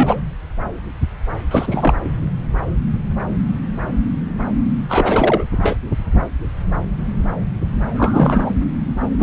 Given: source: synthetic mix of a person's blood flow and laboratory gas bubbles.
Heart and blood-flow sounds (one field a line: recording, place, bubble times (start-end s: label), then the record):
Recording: Doppler ultrasound of blood flow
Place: subclavian vein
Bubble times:
0.00-0.21 s: bubbles
1.50-1.94 s: bubbles
2.04-2.09 s: bubbles
4.89-5.44 s: bubbles
5.62-5.78 s: bubbles
7.95-8.52 s: bubbles
9.19-9.22 s: bubbles
From the record:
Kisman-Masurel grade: 333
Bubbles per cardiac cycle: rolling drumbeat, 9 or more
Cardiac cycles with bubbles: 50 to 99%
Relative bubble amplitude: loud (0.450 to 0.775)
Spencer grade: 3 (all of the cardiac periods contain showers or single bubble signals, but not dominating or overriding the cardiac motion signals)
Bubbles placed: anywhere in the cardiac cycle